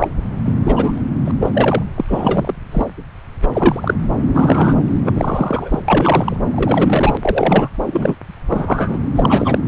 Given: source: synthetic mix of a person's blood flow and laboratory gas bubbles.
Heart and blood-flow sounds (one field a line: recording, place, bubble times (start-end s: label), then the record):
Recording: Doppler ultrasound of blood flow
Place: subclavian vein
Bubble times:
0.00-0.08 s: bubbles
0.46-0.54 s: bubbles
0.64-1.01 s: bubbles
1.25-1.31 s: bubbles
1.40-1.50 s: bubbles
1.53-1.83 s: bubbles
1.96-2.04 s: bubbles
2.08-2.54 s: bubbles
2.71-2.88 s: bubbles
3.42-3.46 s: bubbles
3.53-3.95 s: bubbles
4.26-4.76 s: bubbles
5.05-5.79 s: bubbles
5.88-6.37 s: bubbles
6.53-7.17 s: bubbles
7.21-7.70 s: bubbles
7.86-8.16 s: bubbles
8.49-8.99 s: bubbles
9.15-9.59 s: bubbles
From the record:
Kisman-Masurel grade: 243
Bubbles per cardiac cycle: several, 3 to 8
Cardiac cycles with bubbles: 100%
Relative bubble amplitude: loud (0.450 to 0.775)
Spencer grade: 3 (all of the cardiac periods contain showers or single bubble signals, but not dominating or overriding the cardiac motion signals)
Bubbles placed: anywhere in the cardiac cycle